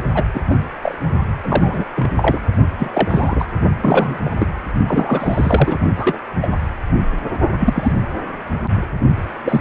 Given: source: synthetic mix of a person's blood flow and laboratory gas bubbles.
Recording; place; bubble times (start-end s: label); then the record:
Doppler ultrasound of blood flow; precordium
0.15-0.24 s: bubbles
0.34-0.41 s: bubbles
0.50-0.55 s: bubbles
0.82-0.95 s: bubbles
1.43-1.84 s: bubbles
1.96-2.10 s: bubbles
2.16-2.40 s: bubbles
2.79-3.46 s: bubbles
3.80-4.30 s: bubbles
4.39-4.47 s: bubbles
4.88-5.79 s: bubbles
5.96-6.20 s: bubbles
6.41-6.51 s: bubbles
7.59-8.02 s: bubbles
9.45-9.61 s: bubbles
From the record:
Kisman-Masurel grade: 243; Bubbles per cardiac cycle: several, 3 to 8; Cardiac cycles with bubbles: 100%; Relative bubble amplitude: loud (0.450 to 0.775); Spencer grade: 3 (all of the cardiac periods contain showers or single bubble signals, but not dominating or overriding the cardiac motion signals); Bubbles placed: only in the low amplitude regions of the cardiac cycle